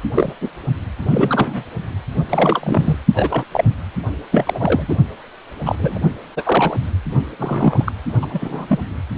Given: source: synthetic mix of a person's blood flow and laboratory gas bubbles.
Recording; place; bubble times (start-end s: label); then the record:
Doppler ultrasound of blood flow; precordium
0.14-0.32 s: bubbles
0.41-0.49 s: bubbles
1.03-1.64 s: bubbles
2.29-2.98 s: bubbles
3.15-3.44 s: bubbles
3.52-3.65 s: bubbles
4.31-4.97 s: bubbles
5.65-5.75 s: bubbles
5.78-5.98 s: bubbles
6.36-6.76 s: bubbles
7.38-7.92 s: bubbles
8.21-8.79 s: bubbles
From the record:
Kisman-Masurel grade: 243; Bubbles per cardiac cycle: several, 3 to 8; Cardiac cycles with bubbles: 100%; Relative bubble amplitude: loud (0.450 to 0.775); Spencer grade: 3 (all of the cardiac periods contain showers or single bubble signals, but not dominating or overriding the cardiac motion signals); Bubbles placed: only in the low amplitude regions of the cardiac cycle